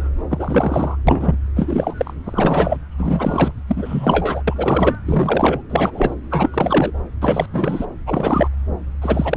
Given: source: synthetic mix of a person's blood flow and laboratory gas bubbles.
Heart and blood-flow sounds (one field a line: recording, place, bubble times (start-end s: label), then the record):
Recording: Doppler ultrasound of blood flow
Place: subclavian vein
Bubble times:
0.30-0.97 s: bubbles
1.07-1.36 s: bubbles
1.56-1.94 s: bubbles
1.97-2.14 s: bubbles
2.23-2.77 s: bubbles
2.98-3.52 s: bubbles
3.68-4.42 s: bubbles
4.47-4.53 s: bubbles
4.56-4.95 s: bubbles
5.05-5.61 s: bubbles
5.69-6.14 s: bubbles
6.30-6.49 s: bubbles
6.53-6.92 s: bubbles
7.21-7.46 s: bubbles
7.52-7.86 s: bubbles
8.06-8.49 s: bubbles
9.02-9.37 s: bubbles
From the record:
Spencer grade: 3 (all of the cardiac periods contain showers or single bubble signals, but not dominating or overriding the cardiac motion signals)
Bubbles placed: anywhere in the cardiac cycle